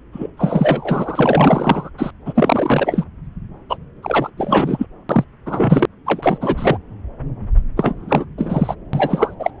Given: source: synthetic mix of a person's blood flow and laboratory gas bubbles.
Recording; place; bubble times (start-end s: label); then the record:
Doppler ultrasound of blood flow; subclavian vein
0.12-0.28 s: bubbles
0.37-1.90 s: bubbles
1.97-2.11 s: bubbles
2.26-3.07 s: bubbles
3.69-3.77 s: bubbles
4.03-4.30 s: bubbles
4.37-4.87 s: bubbles
5.09-5.24 s: bubbles
5.46-5.86 s: bubbles
6.06-6.38 s: bubbles
6.41-6.78 s: bubbles
7.76-8.25 s: bubbles
8.38-8.74 s: bubbles
8.93-9.35 s: bubbles
9.39-9.50 s: bubbles
From the record:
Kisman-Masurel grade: 343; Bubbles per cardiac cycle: rolling drumbeat, 9 or more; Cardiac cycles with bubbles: 100%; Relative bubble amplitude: loud (0.450 to 0.775); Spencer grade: 3 (all of the cardiac periods contain showers or single bubble signals, but not dominating or overriding the cardiac motion signals); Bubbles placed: anywhere in the cardiac cycle